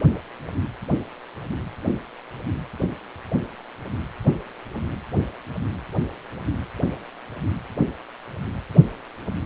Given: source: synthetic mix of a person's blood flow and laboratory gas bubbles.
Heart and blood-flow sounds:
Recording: Doppler ultrasound of blood flow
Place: precordium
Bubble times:
no bubbles
From the record:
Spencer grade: 0 (complete lack of bubble signals)

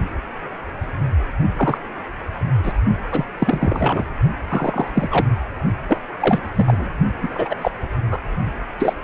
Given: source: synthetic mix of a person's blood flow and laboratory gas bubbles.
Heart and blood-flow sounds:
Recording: Doppler ultrasound of blood flow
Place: precordium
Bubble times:
1.56-1.77 s: bubbles
2.63-2.73 s: bubbles
3.12-3.25 s: bubbles
3.39-4.08 s: bubbles
4.49-4.88 s: bubbles
4.95-5.26 s: bubbles
5.88-6.00 s: bubbles
6.21-6.40 s: bubbles
6.55-6.89 s: bubbles
7.21-7.29 s: bubbles
7.34-7.56 s: bubbles
7.61-7.72 s: bubbles
8.11-8.20 s: bubbles
8.78-8.93 s: bubbles
From the record:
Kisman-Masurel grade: 232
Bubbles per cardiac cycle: several, 3 to 8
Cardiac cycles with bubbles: 50 to 99%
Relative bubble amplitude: moderate (0.250 to 0.450)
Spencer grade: 3 (all of the cardiac periods contain showers or single bubble signals, but not dominating or overriding the cardiac motion signals)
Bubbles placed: only in the low amplitude regions of the cardiac cycle

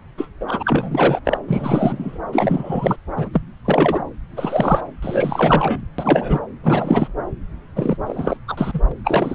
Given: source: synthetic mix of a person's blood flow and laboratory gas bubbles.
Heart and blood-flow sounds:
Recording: Doppler ultrasound of blood flow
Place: subclavian vein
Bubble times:
0.17-0.28 s: bubbles
0.40-1.19 s: bubbles
1.25-1.38 s: bubbles
1.48-2.19 s: bubbles
2.32-2.96 s: bubbles
3.17-3.29 s: bubbles
3.33-3.42 s: bubbles
3.65-4.03 s: bubbles
4.37-4.81 s: bubbles
5.02-5.81 s: bubbles
5.98-6.39 s: bubbles
6.63-7.08 s: bubbles
7.75-7.97 s: bubbles
8.06-8.37 s: bubbles
8.48-8.80 s: bubbles
9.04-9.35 s: bubbles
From the record:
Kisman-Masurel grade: 333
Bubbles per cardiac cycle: rolling drumbeat, 9 or more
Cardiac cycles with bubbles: 50 to 99%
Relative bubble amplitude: loud (0.450 to 0.775)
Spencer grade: 3 (all of the cardiac periods contain showers or single bubble signals, but not dominating or overriding the cardiac motion signals)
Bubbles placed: anywhere in the cardiac cycle

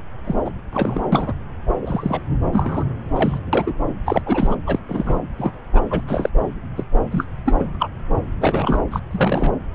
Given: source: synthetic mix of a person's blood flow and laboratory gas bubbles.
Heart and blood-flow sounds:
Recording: Doppler ultrasound of blood flow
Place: subclavian vein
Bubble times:
0.24-0.36 s: bubbles
0.45-0.50 s: bubbles
0.73-1.02 s: bubbles
1.12-1.32 s: bubbles
1.81-2.23 s: bubbles
2.53-2.84 s: bubbles
3.15-3.39 s: bubbles
3.53-3.74 s: bubbles
4.05-4.21 s: bubbles
4.26-4.55 s: bubbles
4.67-4.79 s: bubbles
4.88-5.19 s: bubbles
5.38-5.54 s: bubbles
5.73-5.81 s: bubbles
5.90-6.01 s: bubbles
6.07-6.29 s: bubbles
6.76-6.83 s: bubbles
7.11-7.26 s: bubbles
7.45-7.56 s: bubbles
7.58-7.64 s: bubbles
7.75-7.89 s: bubbles
8.40-8.82 s: bubbles
8.91-8.99 s: bubbles
9.11-9.52 s: bubbles
From the record:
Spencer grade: 3 (all of the cardiac periods contain showers or single bubble signals, but not dominating or overriding the cardiac motion signals)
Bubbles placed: anywhere in the cardiac cycle

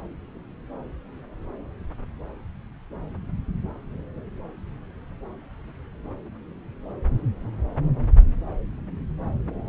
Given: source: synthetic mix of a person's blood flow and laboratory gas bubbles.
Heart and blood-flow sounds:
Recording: Doppler ultrasound of blood flow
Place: subclavian vein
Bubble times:
no bubbles
From the record:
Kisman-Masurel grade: 000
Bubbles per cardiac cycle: 0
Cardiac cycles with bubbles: 0%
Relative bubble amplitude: no bubbles discernible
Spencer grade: 0 (complete lack of bubble signals)

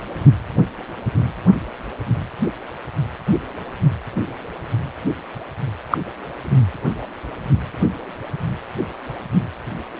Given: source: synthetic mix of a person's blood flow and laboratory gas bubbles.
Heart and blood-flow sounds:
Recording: Doppler ultrasound of blood flow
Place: precordium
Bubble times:
5.90-5.97 s: bubbles
From the record:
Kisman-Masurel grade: 113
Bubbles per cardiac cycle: 1 to 2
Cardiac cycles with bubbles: 1 to 10%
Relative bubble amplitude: loud (0.450 to 0.775)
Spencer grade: 1 (occasional bubble signal discernible with the cardiac motion signal, with majority of cardiac periods free of bubbles)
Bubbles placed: anywhere in the cardiac cycle

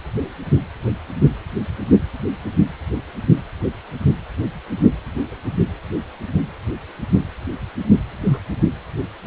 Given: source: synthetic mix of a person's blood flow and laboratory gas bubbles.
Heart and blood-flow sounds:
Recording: Doppler ultrasound of blood flow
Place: precordium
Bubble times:
8.23-8.39 s: bubbles
From the record:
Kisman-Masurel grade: 122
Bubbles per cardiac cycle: 1 to 2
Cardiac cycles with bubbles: 10 to 50%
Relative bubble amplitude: moderate (0.250 to 0.450)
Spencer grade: 2 (many but less than half of the cardiac periods contain bubble signals, singularly or in groups)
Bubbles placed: anywhere in the cardiac cycle

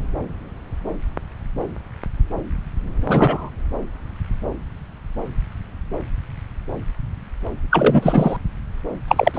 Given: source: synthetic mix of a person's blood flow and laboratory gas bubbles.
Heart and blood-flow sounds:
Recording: Doppler ultrasound of blood flow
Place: subclavian vein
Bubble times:
3.07-3.50 s: bubbles
7.71-8.37 s: bubbles
9.07-9.31 s: bubbles
9.34-9.38 s: bubbles
From the record:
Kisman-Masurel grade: 223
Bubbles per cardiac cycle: several, 3 to 8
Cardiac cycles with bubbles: 10 to 50%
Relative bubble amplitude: loud (0.450 to 0.775)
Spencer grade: 2 (many but less than half of the cardiac periods contain bubble signals, singularly or in groups)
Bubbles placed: anywhere in the cardiac cycle

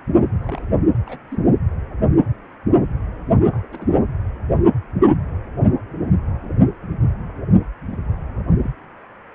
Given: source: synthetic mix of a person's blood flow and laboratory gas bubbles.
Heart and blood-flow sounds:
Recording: Doppler ultrasound of blood flow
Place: precordium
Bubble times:
0.16-0.28 s: bubbles
0.44-0.62 s: bubbles
1.05-1.17 s: bubbles
1.31-1.43 s: bubbles
3.51-3.98 s: bubbles
7.91-7.99 s: bubbles
8.62-8.71 s: bubbles
From the record:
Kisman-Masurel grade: 121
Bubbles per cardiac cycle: 1 to 2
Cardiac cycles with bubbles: 10 to 50%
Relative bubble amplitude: barely perceptible (0.100 to 0.250)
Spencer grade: 2 (many but less than half of the cardiac periods contain bubble signals, singularly or in groups)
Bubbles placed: anywhere in the cardiac cycle

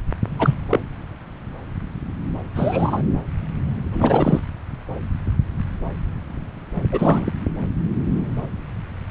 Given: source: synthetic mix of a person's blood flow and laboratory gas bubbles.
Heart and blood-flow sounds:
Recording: Doppler ultrasound of blood flow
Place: subclavian vein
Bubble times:
0.39-0.55 s: bubbles
0.70-0.79 s: bubbles
2.54-3.02 s: bubbles
3.92-4.41 s: bubbles
6.92-7.33 s: bubbles
From the record:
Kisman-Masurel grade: 223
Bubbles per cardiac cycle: several, 3 to 8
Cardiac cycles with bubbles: 10 to 50%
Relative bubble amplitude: loud (0.450 to 0.775)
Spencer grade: 2 (many but less than half of the cardiac periods contain bubble signals, singularly or in groups)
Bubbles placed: anywhere in the cardiac cycle

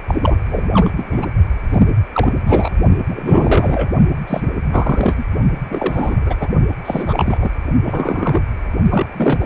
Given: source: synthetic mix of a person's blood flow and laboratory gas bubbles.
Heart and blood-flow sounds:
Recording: Doppler ultrasound of blood flow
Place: precordium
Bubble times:
0.08-0.20 s: bubbles
0.22-0.37 s: bubbles
0.49-0.90 s: bubbles
0.97-1.26 s: bubbles
1.71-2.02 s: bubbles
2.12-2.33 s: bubbles
2.47-2.72 s: bubbles
3.08-3.90 s: bubbles
4.27-4.50 s: bubbles
4.69-5.25 s: bubbles
5.70-6.48 s: bubbles
6.85-7.51 s: bubbles
7.83-8.42 s: bubbles
8.89-9.46 s: bubbles
From the record:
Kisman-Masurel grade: 343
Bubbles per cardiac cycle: rolling drumbeat, 9 or more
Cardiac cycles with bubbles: 100%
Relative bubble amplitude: loud (0.450 to 0.775)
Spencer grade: 3 (all of the cardiac periods contain showers or single bubble signals, but not dominating or overriding the cardiac motion signals)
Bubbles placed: only in the low amplitude regions of the cardiac cycle

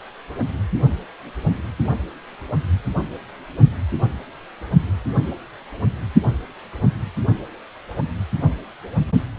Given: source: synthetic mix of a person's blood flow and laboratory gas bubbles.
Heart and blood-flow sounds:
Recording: Doppler ultrasound of blood flow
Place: precordium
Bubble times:
no bubbles
From the record:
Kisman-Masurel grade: 000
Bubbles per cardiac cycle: 0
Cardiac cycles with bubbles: 0%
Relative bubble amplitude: no bubbles discernible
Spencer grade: 0 (complete lack of bubble signals)

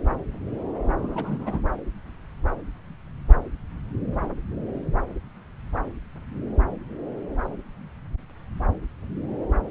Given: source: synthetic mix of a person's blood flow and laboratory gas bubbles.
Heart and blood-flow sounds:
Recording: Doppler ultrasound of blood flow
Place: subclavian vein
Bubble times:
0.97-1.60 s: bubbles
From the record:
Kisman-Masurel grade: 211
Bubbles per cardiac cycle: several, 3 to 8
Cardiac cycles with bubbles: 1 to 10%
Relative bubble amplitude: barely perceptible (0.100 to 0.250)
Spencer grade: 1 (occasional bubble signal discernible with the cardiac motion signal, with majority of cardiac periods free of bubbles)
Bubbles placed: anywhere in the cardiac cycle

